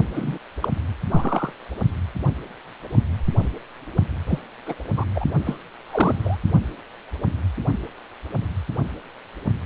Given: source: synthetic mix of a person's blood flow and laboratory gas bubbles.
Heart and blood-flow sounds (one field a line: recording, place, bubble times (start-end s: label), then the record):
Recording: Doppler ultrasound of blood flow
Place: precordium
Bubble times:
0.14-0.38 s: bubbles
0.60-0.68 s: bubbles
1.10-1.52 s: bubbles
4.28-4.38 s: bubbles
4.66-4.75 s: bubbles
4.97-5.05 s: bubbles
5.15-5.25 s: bubbles
5.46-5.58 s: bubbles
5.89-6.38 s: bubbles
From the record:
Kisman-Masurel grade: 222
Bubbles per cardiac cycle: several, 3 to 8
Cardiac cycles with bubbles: 10 to 50%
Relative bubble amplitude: moderate (0.250 to 0.450)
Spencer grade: 2 (many but less than half of the cardiac periods contain bubble signals, singularly or in groups)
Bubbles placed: only in the low amplitude regions of the cardiac cycle